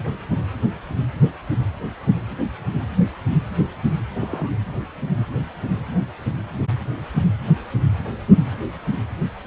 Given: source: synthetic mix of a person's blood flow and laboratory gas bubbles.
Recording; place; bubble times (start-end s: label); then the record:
Doppler ultrasound of blood flow; precordium
4.15-4.49 s: bubbles
From the record:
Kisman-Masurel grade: 111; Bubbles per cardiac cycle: 1 to 2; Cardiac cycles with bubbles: 1 to 10%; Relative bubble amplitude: barely perceptible (0.100 to 0.250); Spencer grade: 1 (occasional bubble signal discernible with the cardiac motion signal, with majority of cardiac periods free of bubbles); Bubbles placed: anywhere in the cardiac cycle